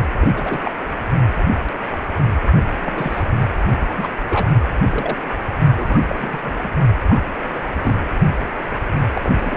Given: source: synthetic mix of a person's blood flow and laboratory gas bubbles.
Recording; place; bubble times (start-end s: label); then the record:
Doppler ultrasound of blood flow; precordium
0.19-0.28 s: bubbles
0.34-0.61 s: bubbles
0.64-0.72 s: bubbles
2.81-3.23 s: bubbles
3.81-4.10 s: bubbles
4.29-4.51 s: bubbles
4.91-5.17 s: bubbles
5.76-5.99 s: bubbles
6.08-6.38 s: bubbles
6.42-6.53 s: bubbles
6.64-6.69 s: bubbles
7.09-7.21 s: bubbles
7.46-7.70 s: bubbles
7.84-7.97 s: bubbles
9.12-9.32 s: bubbles
9.40-9.57 s: bubbles
From the record:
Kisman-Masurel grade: 232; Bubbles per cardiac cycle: several, 3 to 8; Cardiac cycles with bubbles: 50 to 99%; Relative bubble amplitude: moderate (0.250 to 0.450); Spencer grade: 3 (all of the cardiac periods contain showers or single bubble signals, but not dominating or overriding the cardiac motion signals); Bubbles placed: only in the low amplitude regions of the cardiac cycle